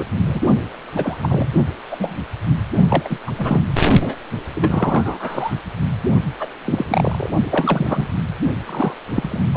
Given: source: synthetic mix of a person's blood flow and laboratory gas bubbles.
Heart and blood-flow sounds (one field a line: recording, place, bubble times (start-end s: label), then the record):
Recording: Doppler ultrasound of blood flow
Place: precordium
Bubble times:
0.00-0.04 s: bubbles
0.26-0.41 s: bubbles
0.95-1.46 s: bubbles
1.90-2.18 s: bubbles
2.90-3.19 s: bubbles
3.27-3.32 s: bubbles
3.38-3.61 s: bubbles
4.01-4.16 s: bubbles
4.55-5.54 s: bubbles
6.40-6.47 s: bubbles
6.65-7.29 s: bubbles
7.46-8.06 s: bubbles
8.65-8.94 s: bubbles
9.05-9.40 s: bubbles
9.54-9.57 s: bubbles
From the record:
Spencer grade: 3 (all of the cardiac periods contain showers or single bubble signals, but not dominating or overriding the cardiac motion signals)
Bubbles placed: only in the low amplitude regions of the cardiac cycle